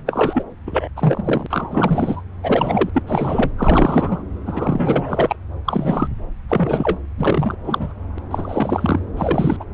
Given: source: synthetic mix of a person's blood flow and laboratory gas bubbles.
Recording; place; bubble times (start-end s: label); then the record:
Doppler ultrasound of blood flow; subclavian vein
0.06-0.44 s: bubbles
0.67-0.88 s: bubbles
0.96-1.47 s: bubbles
1.50-2.22 s: bubbles
2.42-2.90 s: bubbles
2.93-3.03 s: bubbles
3.07-3.51 s: bubbles
3.58-4.23 s: bubbles
4.46-5.36 s: bubbles
5.65-6.08 s: bubbles
6.49-6.98 s: bubbles
7.17-7.54 s: bubbles
7.64-7.93 s: bubbles
8.17-8.19 s: bubbles
8.30-9.00 s: bubbles
9.17-9.56 s: bubbles
9.60-9.64 s: bubbles
From the record:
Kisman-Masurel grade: 343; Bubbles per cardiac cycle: rolling drumbeat, 9 or more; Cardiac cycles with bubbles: 100%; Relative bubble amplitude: loud (0.450 to 0.775); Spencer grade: 3 (all of the cardiac periods contain showers or single bubble signals, but not dominating or overriding the cardiac motion signals); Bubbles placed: anywhere in the cardiac cycle